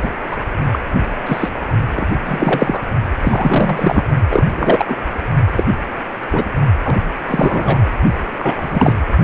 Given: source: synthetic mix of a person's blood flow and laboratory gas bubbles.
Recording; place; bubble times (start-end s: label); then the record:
Doppler ultrasound of blood flow; precordium
0.02-0.09 s: bubbles
0.30-0.37 s: bubbles
0.72-0.79 s: bubbles
1.26-1.49 s: bubbles
1.96-2.07 s: bubbles
2.25-2.83 s: bubbles
3.21-4.02 s: bubbles
4.30-4.43 s: bubbles
4.56-4.85 s: bubbles
4.88-4.97 s: bubbles
5.52-5.63 s: bubbles
6.31-6.47 s: bubbles
6.84-7.01 s: bubbles
7.27-7.79 s: bubbles
8.40-8.54 s: bubbles
8.60-8.94 s: bubbles
From the record:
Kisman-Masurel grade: 243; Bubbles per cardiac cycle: several, 3 to 8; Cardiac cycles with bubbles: 100%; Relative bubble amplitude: loud (0.450 to 0.775); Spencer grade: 3 (all of the cardiac periods contain showers or single bubble signals, but not dominating or overriding the cardiac motion signals); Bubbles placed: only in the low amplitude regions of the cardiac cycle